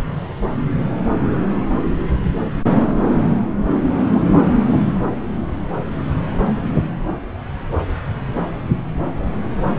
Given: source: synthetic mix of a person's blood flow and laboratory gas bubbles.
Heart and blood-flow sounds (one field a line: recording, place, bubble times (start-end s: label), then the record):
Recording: Doppler ultrasound of blood flow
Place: subclavian vein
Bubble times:
4.15-4.21 s: bubbles
From the record:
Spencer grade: 1 (occasional bubble signal discernible with the cardiac motion signal, with majority of cardiac periods free of bubbles)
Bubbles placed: anywhere in the cardiac cycle